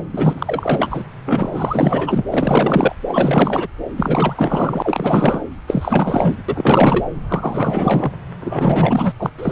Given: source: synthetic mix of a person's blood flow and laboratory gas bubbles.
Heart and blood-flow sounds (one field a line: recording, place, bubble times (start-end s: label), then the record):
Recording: Doppler ultrasound of blood flow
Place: subclavian vein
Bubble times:
0.13-1.04 s: bubbles
1.25-2.25 s: bubbles
2.30-2.94 s: bubbles
3.07-3.67 s: bubbles
3.96-5.45 s: bubbles
5.67-6.35 s: bubbles
6.49-7.05 s: bubbles
7.28-8.10 s: bubbles
8.41-9.13 s: bubbles
9.18-9.30 s: bubbles
9.38-9.52 s: bubbles
From the record:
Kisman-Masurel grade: 444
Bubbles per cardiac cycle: continuous sound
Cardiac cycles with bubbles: 100%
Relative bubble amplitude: maximal (0.775 to 0.999)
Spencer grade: 4 (maximum detectable bubble signal sounding continuously throughout systole and diastole of every cardiac period, and overriding the amplitude of the normal cardiac signals)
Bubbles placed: anywhere in the cardiac cycle